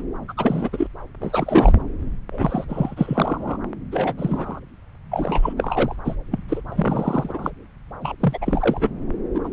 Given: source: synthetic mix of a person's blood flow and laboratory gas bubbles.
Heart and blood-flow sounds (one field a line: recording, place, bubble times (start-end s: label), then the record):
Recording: Doppler ultrasound of blood flow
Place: subclavian vein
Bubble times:
0.00-0.02 s: bubbles
0.28-0.33 s: bubbles
0.37-0.70 s: bubbles
0.73-0.87 s: bubbles
1.20-1.82 s: bubbles
2.31-2.65 s: bubbles
2.69-3.58 s: bubbles
3.92-4.14 s: bubbles
4.17-4.60 s: bubbles
5.11-5.53 s: bubbles
5.57-5.96 s: bubbles
6.04-6.16 s: bubbles
6.31-6.42 s: bubbles
6.48-6.62 s: bubbles
6.68-7.50 s: bubbles
8.02-8.15 s: bubbles
8.20-8.38 s: bubbles
8.41-8.90 s: bubbles
9.35-9.39 s: bubbles
9.44-9.48 s: bubbles
From the record:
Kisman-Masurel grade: 342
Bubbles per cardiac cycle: rolling drumbeat, 9 or more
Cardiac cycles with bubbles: 100%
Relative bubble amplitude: moderate (0.250 to 0.450)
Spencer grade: 3 (all of the cardiac periods contain showers or single bubble signals, but not dominating or overriding the cardiac motion signals)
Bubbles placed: anywhere in the cardiac cycle